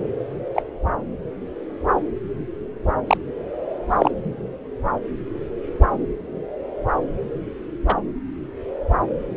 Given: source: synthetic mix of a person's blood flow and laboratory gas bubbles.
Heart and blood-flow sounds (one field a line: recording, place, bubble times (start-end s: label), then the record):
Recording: Doppler ultrasound of blood flow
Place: subclavian vein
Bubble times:
0.54-0.62 s: bubbles
3.07-3.17 s: bubbles
3.89-4.11 s: bubbles
7.87-7.95 s: bubbles
From the record:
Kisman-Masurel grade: 122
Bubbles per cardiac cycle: 1 to 2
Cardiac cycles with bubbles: 10 to 50%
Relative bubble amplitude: moderate (0.250 to 0.450)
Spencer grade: 2 (many but less than half of the cardiac periods contain bubble signals, singularly or in groups)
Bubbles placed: anywhere in the cardiac cycle